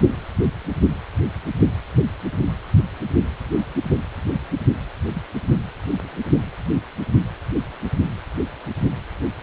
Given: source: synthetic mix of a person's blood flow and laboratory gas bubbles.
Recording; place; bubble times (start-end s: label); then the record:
Doppler ultrasound of blood flow; precordium
5.12-5.23 s: bubbles
6.04-6.09 s: bubbles
From the record:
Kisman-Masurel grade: 121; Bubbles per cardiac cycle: 1 to 2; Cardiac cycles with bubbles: 10 to 50%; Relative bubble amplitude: barely perceptible (0.100 to 0.250); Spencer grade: 2 (many but less than half of the cardiac periods contain bubble signals, singularly or in groups); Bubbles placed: only in the low amplitude regions of the cardiac cycle